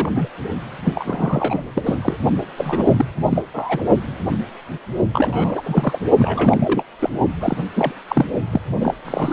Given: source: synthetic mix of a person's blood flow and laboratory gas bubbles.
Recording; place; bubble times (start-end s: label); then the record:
Doppler ultrasound of blood flow; precordium
0.00-0.28 s: bubbles
0.84-1.62 s: bubbles
1.75-1.83 s: bubbles
1.85-1.97 s: bubbles
2.02-2.17 s: bubbles
2.57-2.92 s: bubbles
2.96-3.05 s: bubbles
3.23-3.44 s: bubbles
3.54-3.82 s: bubbles
5.14-5.99 s: bubbles
6.18-6.83 s: bubbles
6.99-7.10 s: bubbles
7.41-7.64 s: bubbles
7.75-7.93 s: bubbles
8.09-8.25 s: bubbles
8.51-8.61 s: bubbles
8.80-8.94 s: bubbles
9.04-9.33 s: bubbles
From the record:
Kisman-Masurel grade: 332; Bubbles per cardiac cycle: rolling drumbeat, 9 or more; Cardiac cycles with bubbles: 50 to 99%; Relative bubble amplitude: moderate (0.250 to 0.450); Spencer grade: 3 (all of the cardiac periods contain showers or single bubble signals, but not dominating or overriding the cardiac motion signals); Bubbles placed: only in the low amplitude regions of the cardiac cycle